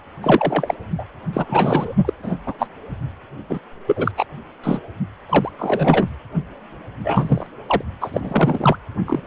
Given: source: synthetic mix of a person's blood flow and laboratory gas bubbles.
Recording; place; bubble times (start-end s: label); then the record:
Doppler ultrasound of blood flow; precordium
0.21-0.74 s: bubbles
0.98-1.04 s: bubbles
1.33-1.96 s: bubbles
2.04-2.13 s: bubbles
2.23-2.36 s: bubbles
2.46-2.53 s: bubbles
2.59-2.67 s: bubbles
3.49-3.60 s: bubbles
3.87-4.12 s: bubbles
4.17-4.25 s: bubbles
4.64-4.79 s: bubbles
5.29-5.52 s: bubbles
5.58-6.07 s: bubbles
7.04-7.47 s: bubbles
7.67-7.81 s: bubbles
8.01-8.78 s: bubbles
9.06-9.21 s: bubbles
From the record:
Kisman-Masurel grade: 243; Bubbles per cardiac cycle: several, 3 to 8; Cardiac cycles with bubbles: 100%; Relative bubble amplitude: loud (0.450 to 0.775); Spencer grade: 3 (all of the cardiac periods contain showers or single bubble signals, but not dominating or overriding the cardiac motion signals); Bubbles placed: only in the low amplitude regions of the cardiac cycle